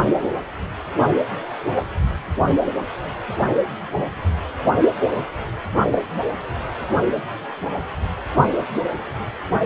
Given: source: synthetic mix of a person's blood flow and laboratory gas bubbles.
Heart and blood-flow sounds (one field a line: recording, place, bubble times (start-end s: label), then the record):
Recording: Doppler ultrasound of blood flow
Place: precordium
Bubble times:
5.91-6.07 s: bubbles
From the record:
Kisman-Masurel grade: 111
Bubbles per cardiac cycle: 1 to 2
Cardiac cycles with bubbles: 1 to 10%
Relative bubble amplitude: barely perceptible (0.100 to 0.250)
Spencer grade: 1 (occasional bubble signal discernible with the cardiac motion signal, with majority of cardiac periods free of bubbles)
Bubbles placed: anywhere in the cardiac cycle